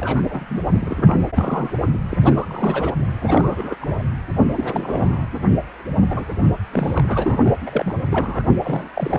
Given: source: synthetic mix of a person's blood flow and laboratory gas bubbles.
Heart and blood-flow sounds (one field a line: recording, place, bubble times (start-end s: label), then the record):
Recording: Doppler ultrasound of blood flow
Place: precordium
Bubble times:
0.00-0.25 s: bubbles
0.28-0.61 s: bubbles
0.72-1.18 s: bubbles
1.37-1.77 s: bubbles
1.94-1.99 s: bubbles
2.09-2.17 s: bubbles
2.21-2.93 s: bubbles
3.20-3.75 s: bubbles
3.80-4.02 s: bubbles
4.52-5.25 s: bubbles
6.09-6.24 s: bubbles
6.73-7.40 s: bubbles
7.45-7.54 s: bubbles
7.65-7.95 s: bubbles
8.11-8.43 s: bubbles
8.62-8.88 s: bubbles
8.95-9.19 s: bubbles
From the record:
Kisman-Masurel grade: 342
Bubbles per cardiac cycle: rolling drumbeat, 9 or more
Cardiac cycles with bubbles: 100%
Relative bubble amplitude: moderate (0.250 to 0.450)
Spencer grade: 3 (all of the cardiac periods contain showers or single bubble signals, but not dominating or overriding the cardiac motion signals)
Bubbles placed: anywhere in the cardiac cycle